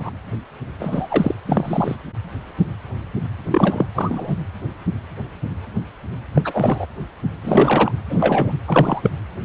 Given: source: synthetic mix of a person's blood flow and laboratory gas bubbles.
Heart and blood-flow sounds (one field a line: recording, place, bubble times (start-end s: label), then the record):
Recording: Doppler ultrasound of blood flow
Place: precordium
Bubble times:
0.00-0.10 s: bubbles
0.79-1.34 s: bubbles
1.46-1.96 s: bubbles
3.45-3.86 s: bubbles
3.94-4.37 s: bubbles
6.34-6.42 s: bubbles
6.44-6.86 s: bubbles
7.43-7.92 s: bubbles
8.09-8.52 s: bubbles
8.67-9.10 s: bubbles
From the record:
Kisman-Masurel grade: 233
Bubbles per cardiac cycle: several, 3 to 8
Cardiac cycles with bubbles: 50 to 99%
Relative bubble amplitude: loud (0.450 to 0.775)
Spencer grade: 3 (all of the cardiac periods contain showers or single bubble signals, but not dominating or overriding the cardiac motion signals)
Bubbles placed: anywhere in the cardiac cycle